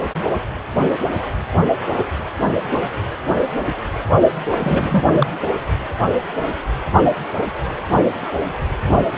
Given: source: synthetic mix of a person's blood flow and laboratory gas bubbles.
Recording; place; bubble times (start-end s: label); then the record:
Doppler ultrasound of blood flow; precordium
4.50-5.31 s: bubbles
From the record:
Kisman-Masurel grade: 222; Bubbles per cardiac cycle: several, 3 to 8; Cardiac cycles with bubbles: 10 to 50%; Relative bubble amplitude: moderate (0.250 to 0.450); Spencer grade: 2 (many but less than half of the cardiac periods contain bubble signals, singularly or in groups); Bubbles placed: anywhere in the cardiac cycle